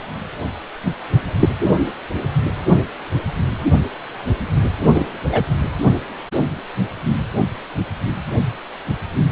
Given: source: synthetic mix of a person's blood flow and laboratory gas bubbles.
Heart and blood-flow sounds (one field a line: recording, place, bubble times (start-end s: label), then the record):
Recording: Doppler ultrasound of blood flow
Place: precordium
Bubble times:
1.40-1.49 s: bubbles
4.94-5.06 s: bubbles
5.32-5.42 s: bubbles
From the record:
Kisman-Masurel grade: 123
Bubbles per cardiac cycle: 1 to 2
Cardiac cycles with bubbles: 10 to 50%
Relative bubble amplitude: loud (0.450 to 0.775)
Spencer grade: 2 (many but less than half of the cardiac periods contain bubble signals, singularly or in groups)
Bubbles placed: only in the low amplitude regions of the cardiac cycle